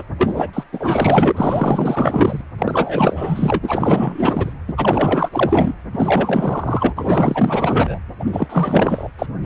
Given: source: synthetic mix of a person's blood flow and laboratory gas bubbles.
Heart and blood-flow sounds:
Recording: Doppler ultrasound of blood flow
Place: precordium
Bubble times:
0.00-0.03 s: bubbles
0.18-0.51 s: bubbles
0.53-0.64 s: bubbles
0.72-1.32 s: bubbles
1.36-2.41 s: bubbles
2.58-3.58 s: bubbles
3.62-4.53 s: bubbles
4.68-4.74 s: bubbles
4.77-5.73 s: bubbles
5.92-7.98 s: bubbles
8.20-9.08 s: bubbles
9.19-9.26 s: bubbles
9.42-9.46 s: bubbles
From the record:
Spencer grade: 4 (maximum detectable bubble signal sounding continuously throughout systole and diastole of every cardiac period, and overriding the amplitude of the normal cardiac signals)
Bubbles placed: anywhere in the cardiac cycle

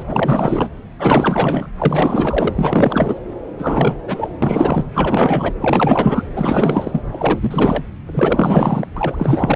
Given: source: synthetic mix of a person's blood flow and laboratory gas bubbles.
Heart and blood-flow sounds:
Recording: Doppler ultrasound of blood flow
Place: subclavian vein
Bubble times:
0.00-0.03 s: bubbles
0.07-0.69 s: bubbles
0.98-1.68 s: bubbles
1.78-2.54 s: bubbles
2.58-3.15 s: bubbles
3.58-3.98 s: bubbles
4.07-4.28 s: bubbles
4.42-4.84 s: bubbles
4.94-5.53 s: bubbles
5.61-6.23 s: bubbles
6.36-7.02 s: bubbles
7.12-7.84 s: bubbles
8.07-8.88 s: bubbles
8.96-9.56 s: bubbles
From the record:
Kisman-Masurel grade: 444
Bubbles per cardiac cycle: continuous sound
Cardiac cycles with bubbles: 100%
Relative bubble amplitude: maximal (0.775 to 0.999)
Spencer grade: 4 (maximum detectable bubble signal sounding continuously throughout systole and diastole of every cardiac period, and overriding the amplitude of the normal cardiac signals)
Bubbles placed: anywhere in the cardiac cycle

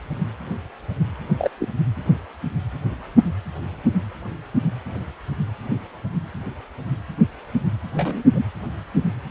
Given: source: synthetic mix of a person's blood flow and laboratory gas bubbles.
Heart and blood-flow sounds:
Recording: Doppler ultrasound of blood flow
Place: precordium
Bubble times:
1.39-1.50 s: bubbles
1.59-1.69 s: bubbles
7.93-8.23 s: bubbles
8.35-8.44 s: bubbles
From the record:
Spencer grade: 1 (occasional bubble signal discernible with the cardiac motion signal, with majority of cardiac periods free of bubbles)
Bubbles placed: anywhere in the cardiac cycle

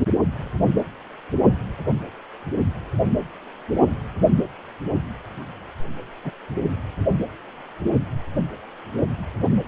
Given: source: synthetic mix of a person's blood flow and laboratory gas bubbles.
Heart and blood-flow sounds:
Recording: Doppler ultrasound of blood flow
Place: precordium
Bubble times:
6.24-6.32 s: bubbles
From the record:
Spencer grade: 2 (many but less than half of the cardiac periods contain bubble signals, singularly or in groups)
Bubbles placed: only in the low amplitude regions of the cardiac cycle

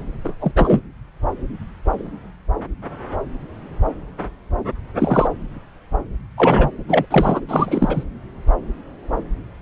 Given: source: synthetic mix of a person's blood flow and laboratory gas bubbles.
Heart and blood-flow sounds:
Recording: Doppler ultrasound of blood flow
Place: subclavian vein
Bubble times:
0.24-0.34 s: bubbles
0.41-0.53 s: bubbles
0.56-0.81 s: bubbles
4.99-5.28 s: bubbles
6.37-6.70 s: bubbles
6.88-7.05 s: bubbles
7.11-7.41 s: bubbles
7.48-8.04 s: bubbles
From the record:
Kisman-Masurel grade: 223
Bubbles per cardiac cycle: several, 3 to 8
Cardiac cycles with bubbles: 10 to 50%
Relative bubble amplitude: loud (0.450 to 0.775)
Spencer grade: 2 (many but less than half of the cardiac periods contain bubble signals, singularly or in groups)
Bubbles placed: anywhere in the cardiac cycle

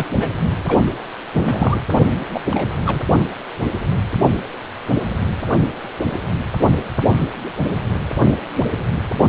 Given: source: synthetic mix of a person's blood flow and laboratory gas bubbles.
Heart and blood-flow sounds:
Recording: Doppler ultrasound of blood flow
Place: precordium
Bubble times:
0.00-0.05 s: bubbles
0.14-0.28 s: bubbles
0.67-0.83 s: bubbles
1.33-1.79 s: bubbles
2.33-2.41 s: bubbles
2.45-2.67 s: bubbles
2.86-2.99 s: bubbles
From the record:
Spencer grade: 2 (many but less than half of the cardiac periods contain bubble signals, singularly or in groups)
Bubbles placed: only in the low amplitude regions of the cardiac cycle

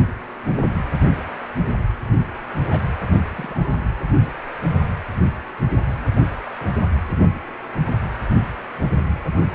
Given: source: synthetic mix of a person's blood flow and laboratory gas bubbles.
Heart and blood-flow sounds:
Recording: Doppler ultrasound of blood flow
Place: precordium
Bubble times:
2.64-2.85 s: bubbles
3.13-3.18 s: bubbles
3.29-3.80 s: bubbles
6.59-6.71 s: bubbles
From the record:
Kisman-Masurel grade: 121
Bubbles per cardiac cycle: 1 to 2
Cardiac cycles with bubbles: 10 to 50%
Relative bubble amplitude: barely perceptible (0.100 to 0.250)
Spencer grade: 2 (many but less than half of the cardiac periods contain bubble signals, singularly or in groups)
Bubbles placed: anywhere in the cardiac cycle

